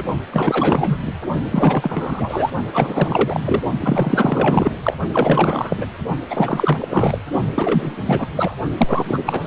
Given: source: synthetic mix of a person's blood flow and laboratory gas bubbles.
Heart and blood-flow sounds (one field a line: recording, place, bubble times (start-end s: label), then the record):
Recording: Doppler ultrasound of blood flow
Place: precordium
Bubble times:
0.00-0.03 s: bubbles
0.31-0.97 s: bubbles
1.06-1.12 s: bubbles
1.51-2.51 s: bubbles
2.73-3.62 s: bubbles
3.81-4.76 s: bubbles
4.83-4.94 s: bubbles
5.12-5.86 s: bubbles
6.29-7.18 s: bubbles
7.55-7.95 s: bubbles
8.05-8.28 s: bubbles
8.37-8.54 s: bubbles
8.77-9.47 s: bubbles
From the record:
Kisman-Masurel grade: 444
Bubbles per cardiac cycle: continuous sound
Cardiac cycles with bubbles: 100%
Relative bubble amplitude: maximal (0.775 to 0.999)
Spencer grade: 4 (maximum detectable bubble signal sounding continuously throughout systole and diastole of every cardiac period, and overriding the amplitude of the normal cardiac signals)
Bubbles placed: only in the low amplitude regions of the cardiac cycle